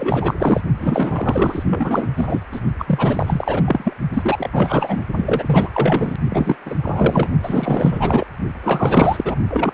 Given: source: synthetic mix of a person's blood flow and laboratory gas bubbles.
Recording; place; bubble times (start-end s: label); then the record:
Doppler ultrasound of blood flow; precordium
0.00-0.34 s: bubbles
0.39-0.60 s: bubbles
0.79-1.63 s: bubbles
1.70-2.07 s: bubbles
2.16-2.40 s: bubbles
2.52-2.60 s: bubbles
2.78-3.94 s: bubbles
4.13-5.04 s: bubbles
5.17-5.69 s: bubbles
5.73-6.12 s: bubbles
6.29-6.56 s: bubbles
6.65-6.75 s: bubbles
6.83-7.29 s: bubbles
7.42-8.25 s: bubbles
8.63-9.35 s: bubbles
9.50-9.72 s: bubbles
From the record:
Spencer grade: 4 (maximum detectable bubble signal sounding continuously throughout systole and diastole of every cardiac period, and overriding the amplitude of the normal cardiac signals); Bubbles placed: only in the low amplitude regions of the cardiac cycle